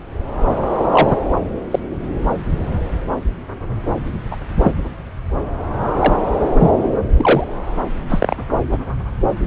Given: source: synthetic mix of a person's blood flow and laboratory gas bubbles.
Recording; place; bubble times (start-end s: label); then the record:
Doppler ultrasound of blood flow; subclavian vein
0.91-1.16 s: bubbles
1.71-1.79 s: bubbles
4.31-4.37 s: bubbles
4.59-4.71 s: bubbles
5.99-6.13 s: bubbles
6.59-6.71 s: bubbles
7.17-7.45 s: bubbles
8.09-8.37 s: bubbles
8.71-8.78 s: bubbles
From the record:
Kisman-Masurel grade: 123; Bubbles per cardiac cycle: 1 to 2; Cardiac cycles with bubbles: 10 to 50%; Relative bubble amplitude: loud (0.450 to 0.775); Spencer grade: 2 (many but less than half of the cardiac periods contain bubble signals, singularly or in groups); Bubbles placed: anywhere in the cardiac cycle